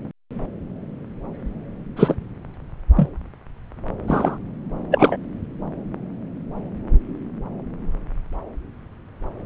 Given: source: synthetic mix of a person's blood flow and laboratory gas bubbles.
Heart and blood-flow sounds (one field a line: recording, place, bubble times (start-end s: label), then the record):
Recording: Doppler ultrasound of blood flow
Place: subclavian vein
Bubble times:
1.96-2.16 s: bubbles
2.96-3.08 s: bubbles
4.07-4.38 s: bubbles
4.91-5.17 s: bubbles
From the record:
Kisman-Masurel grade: 223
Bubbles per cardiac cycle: several, 3 to 8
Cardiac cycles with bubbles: 10 to 50%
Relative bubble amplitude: loud (0.450 to 0.775)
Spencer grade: 2 (many but less than half of the cardiac periods contain bubble signals, singularly or in groups)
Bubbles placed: anywhere in the cardiac cycle